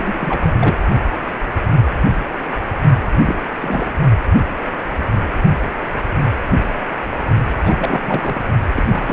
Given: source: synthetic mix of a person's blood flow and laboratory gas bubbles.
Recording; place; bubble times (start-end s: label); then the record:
Doppler ultrasound of blood flow; precordium
0.00-0.77 s: bubbles
3.25-3.42 s: bubbles
3.60-3.92 s: bubbles
7.58-8.03 s: bubbles
8.06-8.41 s: bubbles
8.76-8.83 s: bubbles
8.91-9.13 s: bubbles
From the record:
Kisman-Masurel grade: 332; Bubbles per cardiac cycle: rolling drumbeat, 9 or more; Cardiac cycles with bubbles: 50 to 99%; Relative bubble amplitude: moderate (0.250 to 0.450); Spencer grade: 3 (all of the cardiac periods contain showers or single bubble signals, but not dominating or overriding the cardiac motion signals); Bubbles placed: only in the low amplitude regions of the cardiac cycle